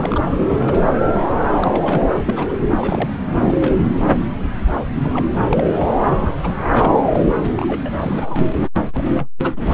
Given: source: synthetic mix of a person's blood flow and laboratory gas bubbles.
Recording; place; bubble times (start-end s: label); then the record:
Doppler ultrasound of blood flow; subclavian vein
0.00-0.20 s: bubbles
0.32-0.95 s: bubbles
1.61-2.23 s: bubbles
2.27-2.55 s: bubbles
2.62-2.71 s: bubbles
2.76-3.10 s: bubbles
3.40-3.89 s: bubbles
4.96-5.25 s: bubbles
5.49-5.73 s: bubbles
5.78-5.94 s: bubbles
6.21-6.36 s: bubbles
6.42-6.54 s: bubbles
6.69-6.92 s: bubbles
7.12-7.20 s: bubbles
7.36-8.47 s: bubbles
8.93-9.01 s: bubbles
9.14-9.27 s: bubbles
9.42-9.51 s: bubbles
9.56-9.65 s: bubbles
From the record:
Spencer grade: 3 (all of the cardiac periods contain showers or single bubble signals, but not dominating or overriding the cardiac motion signals); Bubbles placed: anywhere in the cardiac cycle